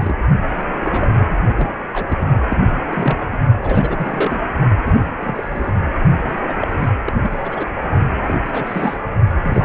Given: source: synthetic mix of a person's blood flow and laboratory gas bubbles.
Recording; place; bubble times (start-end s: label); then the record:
Doppler ultrasound of blood flow; precordium
0.00-0.15 s: bubbles
0.54-0.66 s: bubbles
0.80-1.06 s: bubbles
1.19-1.34 s: bubbles
1.48-1.79 s: bubbles
1.93-2.29 s: bubbles
2.49-2.71 s: bubbles
2.92-3.27 s: bubbles
3.32-3.37 s: bubbles
3.62-4.42 s: bubbles
4.85-5.12 s: bubbles
5.21-5.71 s: bubbles
6.28-6.58 s: bubbles
6.61-6.67 s: bubbles
6.71-6.89 s: bubbles
7.04-7.12 s: bubbles
7.22-7.67 s: bubbles
8.26-8.37 s: bubbles
8.45-8.97 s: bubbles
9.33-9.65 s: bubbles
From the record:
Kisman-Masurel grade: 332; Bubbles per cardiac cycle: rolling drumbeat, 9 or more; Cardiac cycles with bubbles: 50 to 99%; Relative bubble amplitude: moderate (0.250 to 0.450); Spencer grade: 3 (all of the cardiac periods contain showers or single bubble signals, but not dominating or overriding the cardiac motion signals); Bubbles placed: only in the low amplitude regions of the cardiac cycle